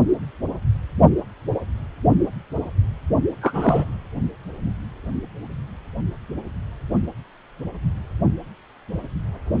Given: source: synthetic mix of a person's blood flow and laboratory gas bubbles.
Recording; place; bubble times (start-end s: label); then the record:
Doppler ultrasound of blood flow; precordium
3.41-3.86 s: bubbles
From the record:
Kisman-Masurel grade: 213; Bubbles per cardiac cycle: several, 3 to 8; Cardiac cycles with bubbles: 1 to 10%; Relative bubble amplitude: loud (0.450 to 0.775); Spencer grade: 1 (occasional bubble signal discernible with the cardiac motion signal, with majority of cardiac periods free of bubbles); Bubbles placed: only in the low amplitude regions of the cardiac cycle